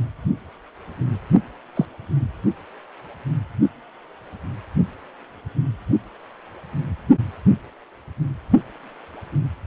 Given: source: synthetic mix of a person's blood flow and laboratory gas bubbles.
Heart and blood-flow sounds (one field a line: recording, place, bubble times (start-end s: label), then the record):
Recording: Doppler ultrasound of blood flow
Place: precordium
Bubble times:
1.75-1.85 s: bubbles
From the record:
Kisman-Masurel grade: 122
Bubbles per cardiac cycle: 1 to 2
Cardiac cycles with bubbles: 10 to 50%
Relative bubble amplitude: moderate (0.250 to 0.450)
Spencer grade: 2 (many but less than half of the cardiac periods contain bubble signals, singularly or in groups)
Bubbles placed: only in the low amplitude regions of the cardiac cycle